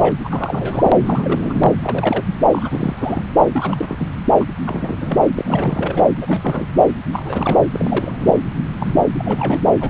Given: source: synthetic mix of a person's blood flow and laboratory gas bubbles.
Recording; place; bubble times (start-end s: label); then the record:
Doppler ultrasound of blood flow; subclavian vein
0.00-0.12 s: bubbles
0.24-0.91 s: bubbles
1.06-1.72 s: bubbles
1.82-2.35 s: bubbles
2.52-3.23 s: bubbles
3.52-4.08 s: bubbles
4.40-4.45 s: bubbles
4.66-5.17 s: bubbles
5.38-6.05 s: bubbles
6.21-6.67 s: bubbles
7.12-7.59 s: bubbles
7.73-8.37 s: bubbles
8.80-8.94 s: bubbles
9.19-9.60 s: bubbles
9.80-9.89 s: bubbles
From the record:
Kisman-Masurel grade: 332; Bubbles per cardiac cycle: rolling drumbeat, 9 or more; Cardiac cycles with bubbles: 50 to 99%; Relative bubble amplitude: moderate (0.250 to 0.450); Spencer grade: 3 (all of the cardiac periods contain showers or single bubble signals, but not dominating or overriding the cardiac motion signals); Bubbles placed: anywhere in the cardiac cycle